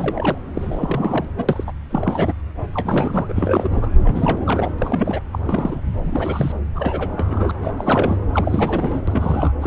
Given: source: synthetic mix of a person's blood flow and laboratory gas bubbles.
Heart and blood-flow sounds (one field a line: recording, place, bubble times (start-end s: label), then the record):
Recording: Doppler ultrasound of blood flow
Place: subclavian vein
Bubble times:
0.00-0.38 s: bubbles
0.54-1.25 s: bubbles
1.38-1.44 s: bubbles
1.48-1.64 s: bubbles
1.66-1.72 s: bubbles
1.89-2.33 s: bubbles
2.74-3.90 s: bubbles
4.03-4.72 s: bubbles
4.78-5.20 s: bubbles
5.32-5.39 s: bubbles
5.45-5.80 s: bubbles
5.98-6.52 s: bubbles
6.75-7.51 s: bubbles
7.61-7.72 s: bubbles
7.77-8.17 s: bubbles
8.32-9.03 s: bubbles
9.07-9.52 s: bubbles
9.61-9.67 s: bubbles
From the record:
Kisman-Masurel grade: 342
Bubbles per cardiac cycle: rolling drumbeat, 9 or more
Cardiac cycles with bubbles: 100%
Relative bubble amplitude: moderate (0.250 to 0.450)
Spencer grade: 3 (all of the cardiac periods contain showers or single bubble signals, but not dominating or overriding the cardiac motion signals)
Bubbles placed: anywhere in the cardiac cycle